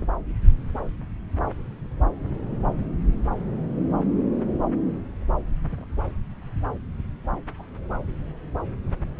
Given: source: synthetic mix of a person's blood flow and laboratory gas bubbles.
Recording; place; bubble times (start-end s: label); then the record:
Doppler ultrasound of blood flow; subclavian vein
5.69-5.88 s: bubbles
7.55-7.62 s: bubbles
From the record:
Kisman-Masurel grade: 121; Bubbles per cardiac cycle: 1 to 2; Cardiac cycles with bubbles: 10 to 50%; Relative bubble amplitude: barely perceptible (0.100 to 0.250); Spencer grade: 2 (many but less than half of the cardiac periods contain bubble signals, singularly or in groups); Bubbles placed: anywhere in the cardiac cycle